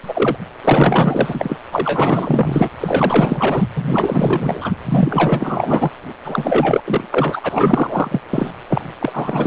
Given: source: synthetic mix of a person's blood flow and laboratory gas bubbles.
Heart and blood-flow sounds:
Doppler ultrasound of blood flow; precordium
0.03-0.37 s: bubbles
0.58-0.60 s: bubbles
0.64-1.57 s: bubbles
1.71-2.70 s: bubbles
2.80-3.66 s: bubbles
3.76-4.71 s: bubbles
4.85-5.92 s: bubbles
6.25-6.81 s: bubbles
6.85-7.03 s: bubbles
7.11-7.41 s: bubbles
7.43-8.20 s: bubbles
8.29-8.52 s: bubbles
8.68-8.93 s: bubbles
9.00-9.47 s: bubbles
From the record:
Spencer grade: 4 (maximum detectable bubble signal sounding continuously throughout systole and diastole of every cardiac period, and overriding the amplitude of the normal cardiac signals); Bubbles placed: anywhere in the cardiac cycle

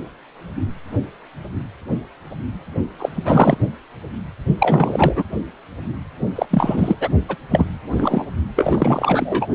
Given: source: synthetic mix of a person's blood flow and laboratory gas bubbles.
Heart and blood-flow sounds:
Doppler ultrasound of blood flow; precordium
2.98-3.58 s: bubbles
4.58-5.25 s: bubbles
6.35-6.46 s: bubbles
6.50-6.96 s: bubbles
7.00-7.09 s: bubbles
7.29-7.37 s: bubbles
7.51-7.66 s: bubbles
7.92-8.27 s: bubbles
8.56-9.48 s: bubbles
From the record:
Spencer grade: 3 (all of the cardiac periods contain showers or single bubble signals, but not dominating or overriding the cardiac motion signals); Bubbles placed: only in the low amplitude regions of the cardiac cycle

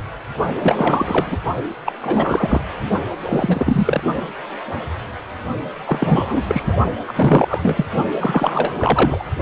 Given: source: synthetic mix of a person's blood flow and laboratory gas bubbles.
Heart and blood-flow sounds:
Doppler ultrasound of blood flow; precordium
0.60-1.38 s: bubbles
1.85-1.92 s: bubbles
2.01-2.62 s: bubbles
3.25-4.04 s: bubbles
5.86-6.63 s: bubbles
6.67-6.78 s: bubbles
7.08-7.12 s: bubbles
7.15-7.85 s: bubbles
8.20-9.24 s: bubbles
From the record:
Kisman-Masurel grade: 333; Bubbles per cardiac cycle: rolling drumbeat, 9 or more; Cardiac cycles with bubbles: 50 to 99%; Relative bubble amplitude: loud (0.450 to 0.775); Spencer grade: 3 (all of the cardiac periods contain showers or single bubble signals, but not dominating or overriding the cardiac motion signals); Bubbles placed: only in the low amplitude regions of the cardiac cycle

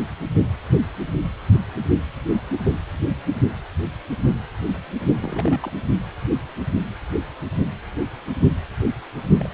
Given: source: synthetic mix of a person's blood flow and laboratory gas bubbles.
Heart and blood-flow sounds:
Doppler ultrasound of blood flow; precordium
5.19-5.60 s: bubbles
5.62-5.73 s: bubbles
9.39-9.48 s: bubbles
From the record:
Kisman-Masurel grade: 221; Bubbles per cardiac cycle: several, 3 to 8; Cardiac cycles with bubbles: 10 to 50%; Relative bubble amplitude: barely perceptible (0.100 to 0.250); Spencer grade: 2 (many but less than half of the cardiac periods contain bubble signals, singularly or in groups); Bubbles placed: only in the low amplitude regions of the cardiac cycle

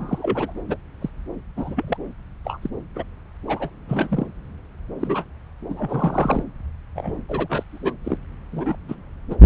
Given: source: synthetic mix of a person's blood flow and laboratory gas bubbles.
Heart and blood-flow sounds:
Doppler ultrasound of blood flow; subclavian vein
0.00-0.52 s: bubbles
0.68-0.77 s: bubbles
1.00-1.09 s: bubbles
1.56-1.97 s: bubbles
2.44-2.59 s: bubbles
2.62-2.70 s: bubbles
2.95-3.04 s: bubbles
3.48-3.70 s: bubbles
3.88-4.27 s: bubbles
5.00-5.25 s: bubbles
5.70-6.43 s: bubbles
6.95-7.17 s: bubbles
7.29-7.64 s: bubbles
7.72-7.93 s: bubbles
8.04-8.17 s: bubbles
8.52-8.76 s: bubbles
8.88-8.96 s: bubbles
9.30-9.35 s: bubbles
From the record:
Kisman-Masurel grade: 242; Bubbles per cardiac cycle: several, 3 to 8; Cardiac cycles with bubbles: 100%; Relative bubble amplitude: moderate (0.250 to 0.450); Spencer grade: 3 (all of the cardiac periods contain showers or single bubble signals, but not dominating or overriding the cardiac motion signals); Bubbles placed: anywhere in the cardiac cycle

